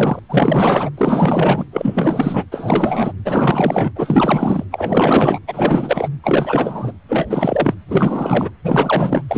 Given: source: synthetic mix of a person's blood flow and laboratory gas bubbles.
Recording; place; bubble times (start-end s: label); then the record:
Doppler ultrasound of blood flow; precordium
0.00-0.19 s: bubbles
0.29-0.90 s: bubbles
0.97-1.65 s: bubbles
1.72-2.44 s: bubbles
2.51-3.12 s: bubbles
3.25-3.93 s: bubbles
3.95-4.66 s: bubbles
4.71-5.39 s: bubbles
5.48-6.08 s: bubbles
6.23-6.92 s: bubbles
7.08-7.75 s: bubbles
7.88-8.51 s: bubbles
8.63-9.22 s: bubbles
9.28-9.38 s: bubbles
From the record:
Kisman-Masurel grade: 444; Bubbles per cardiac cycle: continuous sound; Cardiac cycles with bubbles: 100%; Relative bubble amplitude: maximal (0.775 to 0.999); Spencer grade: 4 (maximum detectable bubble signal sounding continuously throughout systole and diastole of every cardiac period, and overriding the amplitude of the normal cardiac signals); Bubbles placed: anywhere in the cardiac cycle